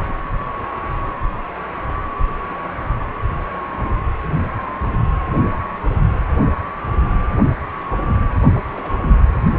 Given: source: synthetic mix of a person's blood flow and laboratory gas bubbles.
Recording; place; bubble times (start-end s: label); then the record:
Doppler ultrasound of blood flow; precordium
0.40-0.46 s: bubbles
2.50-2.54 s: bubbles
8.53-8.61 s: bubbles
8.75-8.97 s: bubbles
From the record:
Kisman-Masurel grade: 121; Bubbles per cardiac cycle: 1 to 2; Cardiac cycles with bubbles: 10 to 50%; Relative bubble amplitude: barely perceptible (0.100 to 0.250); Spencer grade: 2 (many but less than half of the cardiac periods contain bubble signals, singularly or in groups); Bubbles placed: anywhere in the cardiac cycle